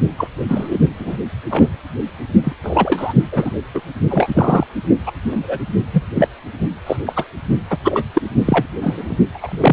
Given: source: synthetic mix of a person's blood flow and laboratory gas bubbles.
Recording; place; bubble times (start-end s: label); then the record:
Doppler ultrasound of blood flow; precordium
0.17-0.28 s: bubbles
0.48-0.78 s: bubbles
0.98-1.17 s: bubbles
1.50-1.68 s: bubbles
2.44-2.52 s: bubbles
2.63-3.13 s: bubbles
3.32-3.50 s: bubbles
3.74-3.81 s: bubbles
4.09-4.67 s: bubbles
5.06-5.12 s: bubbles
5.23-5.44 s: bubbles
5.47-5.60 s: bubbles
5.93-6.03 s: bubbles
6.15-6.28 s: bubbles
6.86-6.97 s: bubbles
7.06-7.14 s: bubbles
7.16-7.25 s: bubbles
7.70-7.78 s: bubbles
7.84-8.04 s: bubbles
8.14-8.21 s: bubbles
8.46-8.66 s: bubbles
8.82-9.04 s: bubbles
9.09-9.16 s: bubbles
9.34-9.73 s: bubbles
From the record:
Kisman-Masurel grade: 243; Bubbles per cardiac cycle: several, 3 to 8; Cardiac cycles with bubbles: 100%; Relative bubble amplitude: loud (0.450 to 0.775); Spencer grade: 3 (all of the cardiac periods contain showers or single bubble signals, but not dominating or overriding the cardiac motion signals); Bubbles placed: only in the low amplitude regions of the cardiac cycle